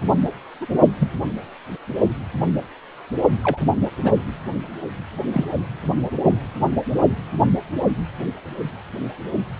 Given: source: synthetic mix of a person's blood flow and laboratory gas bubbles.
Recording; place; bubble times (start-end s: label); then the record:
Doppler ultrasound of blood flow; precordium
0.60-0.66 s: bubbles
0.99-1.10 s: bubbles
3.43-3.58 s: bubbles
4.04-4.12 s: bubbles
5.32-5.45 s: bubbles
From the record:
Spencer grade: 2 (many but less than half of the cardiac periods contain bubble signals, singularly or in groups); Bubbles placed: only in the low amplitude regions of the cardiac cycle